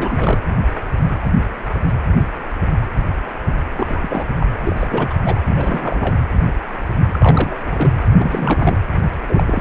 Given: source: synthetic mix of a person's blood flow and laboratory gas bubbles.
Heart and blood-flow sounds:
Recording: Doppler ultrasound of blood flow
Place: precordium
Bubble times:
0.00-0.42 s: bubbles
3.77-4.25 s: bubbles
4.40-4.46 s: bubbles
4.64-5.14 s: bubbles
5.25-5.38 s: bubbles
5.56-6.13 s: bubbles
7.12-7.60 s: bubbles
7.66-7.90 s: bubbles
8.17-8.78 s: bubbles
9.26-9.61 s: bubbles
From the record:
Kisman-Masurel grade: 332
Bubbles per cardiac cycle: rolling drumbeat, 9 or more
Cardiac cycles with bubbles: 50 to 99%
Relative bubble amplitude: moderate (0.250 to 0.450)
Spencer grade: 3 (all of the cardiac periods contain showers or single bubble signals, but not dominating or overriding the cardiac motion signals)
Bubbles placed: anywhere in the cardiac cycle

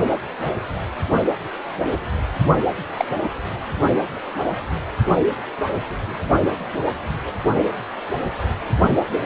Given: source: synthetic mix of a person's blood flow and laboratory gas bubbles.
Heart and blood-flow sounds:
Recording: Doppler ultrasound of blood flow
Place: precordium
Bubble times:
2.98-3.06 s: bubbles
From the record:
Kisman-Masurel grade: 112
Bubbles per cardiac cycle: 1 to 2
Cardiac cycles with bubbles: 1 to 10%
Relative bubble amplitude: moderate (0.250 to 0.450)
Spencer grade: 1 (occasional bubble signal discernible with the cardiac motion signal, with majority of cardiac periods free of bubbles)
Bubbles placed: only in the low amplitude regions of the cardiac cycle

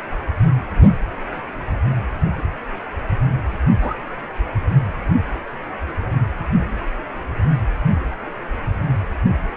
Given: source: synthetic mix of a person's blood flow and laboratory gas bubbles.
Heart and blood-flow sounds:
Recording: Doppler ultrasound of blood flow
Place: precordium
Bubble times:
3.80-3.95 s: bubbles
From the record:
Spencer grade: 1 (occasional bubble signal discernible with the cardiac motion signal, with majority of cardiac periods free of bubbles)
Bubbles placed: anywhere in the cardiac cycle

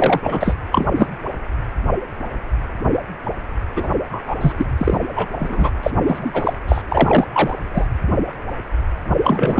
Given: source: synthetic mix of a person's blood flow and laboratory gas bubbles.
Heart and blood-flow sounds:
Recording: Doppler ultrasound of blood flow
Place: precordium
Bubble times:
0.00-0.56 s: bubbles
0.71-0.87 s: bubbles
0.94-1.07 s: bubbles
3.76-3.88 s: bubbles
4.12-4.21 s: bubbles
4.27-4.53 s: bubbles
4.57-4.66 s: bubbles
4.78-4.98 s: bubbles
5.16-5.28 s: bubbles
5.39-5.72 s: bubbles
5.83-5.91 s: bubbles
6.07-6.54 s: bubbles
6.68-6.82 s: bubbles
6.89-7.29 s: bubbles
7.33-7.58 s: bubbles
7.74-7.88 s: bubbles
9.23-9.60 s: bubbles
From the record:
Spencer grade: 3 (all of the cardiac periods contain showers or single bubble signals, but not dominating or overriding the cardiac motion signals)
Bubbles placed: anywhere in the cardiac cycle

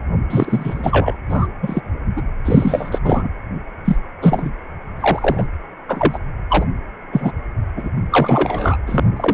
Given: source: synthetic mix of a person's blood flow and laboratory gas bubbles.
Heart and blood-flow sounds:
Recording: Doppler ultrasound of blood flow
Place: precordium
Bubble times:
0.30-1.15 s: bubbles
1.29-1.47 s: bubbles
1.62-1.81 s: bubbles
2.16-2.22 s: bubbles
2.45-3.00 s: bubbles
3.04-3.28 s: bubbles
3.84-3.96 s: bubbles
4.22-4.51 s: bubbles
4.99-5.46 s: bubbles
5.88-6.19 s: bubbles
6.50-6.66 s: bubbles
7.12-7.32 s: bubbles
7.76-7.89 s: bubbles
8.11-8.77 s: bubbles
8.87-9.07 s: bubbles
9.16-9.34 s: bubbles
From the record:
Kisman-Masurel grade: 243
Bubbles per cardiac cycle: several, 3 to 8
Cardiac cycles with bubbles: 100%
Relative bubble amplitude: loud (0.450 to 0.775)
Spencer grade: 3 (all of the cardiac periods contain showers or single bubble signals, but not dominating or overriding the cardiac motion signals)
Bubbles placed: anywhere in the cardiac cycle

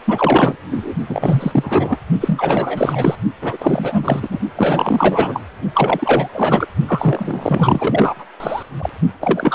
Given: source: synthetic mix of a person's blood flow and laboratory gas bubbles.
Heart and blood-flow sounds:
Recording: Doppler ultrasound of blood flow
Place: precordium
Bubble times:
0.05-0.55 s: bubbles
0.71-0.93 s: bubbles
1.09-1.98 s: bubbles
2.21-3.15 s: bubbles
3.42-4.40 s: bubbles
4.57-5.43 s: bubbles
5.73-6.29 s: bubbles
6.33-6.67 s: bubbles
6.88-8.24 s: bubbles
8.40-8.63 s: bubbles
8.78-8.89 s: bubbles
9.21-9.55 s: bubbles
From the record:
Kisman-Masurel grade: 444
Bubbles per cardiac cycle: continuous sound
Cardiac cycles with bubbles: 100%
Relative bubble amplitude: maximal (0.775 to 0.999)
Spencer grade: 4 (maximum detectable bubble signal sounding continuously throughout systole and diastole of every cardiac period, and overriding the amplitude of the normal cardiac signals)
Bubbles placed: only in the low amplitude regions of the cardiac cycle

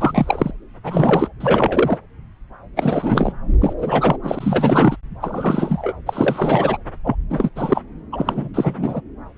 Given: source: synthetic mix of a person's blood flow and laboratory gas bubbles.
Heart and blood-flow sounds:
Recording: Doppler ultrasound of blood flow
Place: subclavian vein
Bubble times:
0.00-0.51 s: bubbles
0.83-1.28 s: bubbles
1.40-1.99 s: bubbles
2.76-3.33 s: bubbles
3.60-3.74 s: bubbles
3.78-4.17 s: bubbles
4.23-4.96 s: bubbles
5.20-5.93 s: bubbles
6.06-6.78 s: bubbles
7.04-7.16 s: bubbles
7.29-7.49 s: bubbles
7.55-7.81 s: bubbles
8.12-8.48 s: bubbles
8.54-9.01 s: bubbles
From the record:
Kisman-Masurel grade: 333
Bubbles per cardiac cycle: rolling drumbeat, 9 or more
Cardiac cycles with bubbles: 50 to 99%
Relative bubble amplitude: loud (0.450 to 0.775)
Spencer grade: 3 (all of the cardiac periods contain showers or single bubble signals, but not dominating or overriding the cardiac motion signals)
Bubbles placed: anywhere in the cardiac cycle

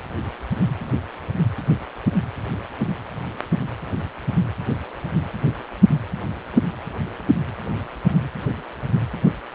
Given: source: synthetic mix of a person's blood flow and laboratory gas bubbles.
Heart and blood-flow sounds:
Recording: Doppler ultrasound of blood flow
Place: precordium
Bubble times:
no bubbles
From the record:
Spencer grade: 0 (complete lack of bubble signals)

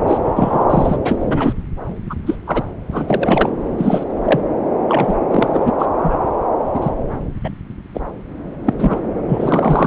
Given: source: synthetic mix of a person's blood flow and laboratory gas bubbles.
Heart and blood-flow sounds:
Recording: Doppler ultrasound of blood flow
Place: subclavian vein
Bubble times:
0.08-0.18 s: bubbles
0.35-0.64 s: bubbles
0.70-0.96 s: bubbles
1.04-1.53 s: bubbles
2.10-2.15 s: bubbles
2.26-2.35 s: bubbles
2.47-2.63 s: bubbles
2.91-3.50 s: bubbles
3.78-4.04 s: bubbles
4.25-4.41 s: bubbles
4.88-5.16 s: bubbles
5.30-5.71 s: bubbles
5.79-5.86 s: bubbles
6.02-6.15 s: bubbles
6.73-6.91 s: bubbles
7.44-7.50 s: bubbles
7.71-7.73 s: bubbles
7.94-8.01 s: bubbles
8.65-8.73 s: bubbles
8.79-9.00 s: bubbles
9.28-9.87 s: bubbles
From the record:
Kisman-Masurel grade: 243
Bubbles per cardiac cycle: several, 3 to 8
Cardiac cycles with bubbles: 100%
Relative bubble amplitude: loud (0.450 to 0.775)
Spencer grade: 3 (all of the cardiac periods contain showers or single bubble signals, but not dominating or overriding the cardiac motion signals)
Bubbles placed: anywhere in the cardiac cycle

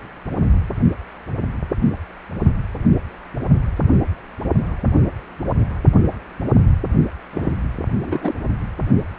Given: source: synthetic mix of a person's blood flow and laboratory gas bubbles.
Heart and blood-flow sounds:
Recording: Doppler ultrasound of blood flow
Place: precordium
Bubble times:
7.33-7.51 s: bubbles
8.03-8.35 s: bubbles
From the record:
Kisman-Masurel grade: 212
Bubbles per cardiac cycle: several, 3 to 8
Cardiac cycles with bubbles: 1 to 10%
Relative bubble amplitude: moderate (0.250 to 0.450)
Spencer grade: 1 (occasional bubble signal discernible with the cardiac motion signal, with majority of cardiac periods free of bubbles)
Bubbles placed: only in the low amplitude regions of the cardiac cycle

